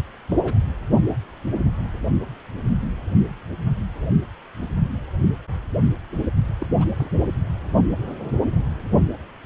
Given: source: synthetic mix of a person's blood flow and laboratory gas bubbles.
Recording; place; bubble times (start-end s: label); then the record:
Doppler ultrasound of blood flow; precordium
0.28-0.40 s: bubbles
0.44-0.57 s: bubbles
6.60-6.67 s: bubbles
6.77-6.88 s: bubbles
6.98-7.11 s: bubbles
From the record:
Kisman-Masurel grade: 221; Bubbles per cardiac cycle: several, 3 to 8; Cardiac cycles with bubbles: 10 to 50%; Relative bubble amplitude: barely perceptible (0.100 to 0.250); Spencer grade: 2 (many but less than half of the cardiac periods contain bubble signals, singularly or in groups); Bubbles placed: only in the low amplitude regions of the cardiac cycle